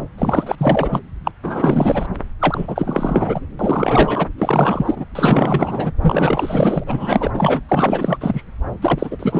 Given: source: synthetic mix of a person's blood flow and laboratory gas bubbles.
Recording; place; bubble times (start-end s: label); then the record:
Doppler ultrasound of blood flow; subclavian vein
0.18-1.00 s: bubbles
1.24-1.31 s: bubbles
1.43-2.07 s: bubbles
2.39-3.40 s: bubbles
3.59-4.29 s: bubbles
4.38-5.05 s: bubbles
5.15-5.92 s: bubbles
6.02-7.31 s: bubbles
7.33-7.60 s: bubbles
7.68-8.17 s: bubbles
8.21-8.43 s: bubbles
8.81-9.40 s: bubbles
From the record:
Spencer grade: 4 (maximum detectable bubble signal sounding continuously throughout systole and diastole of every cardiac period, and overriding the amplitude of the normal cardiac signals); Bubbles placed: anywhere in the cardiac cycle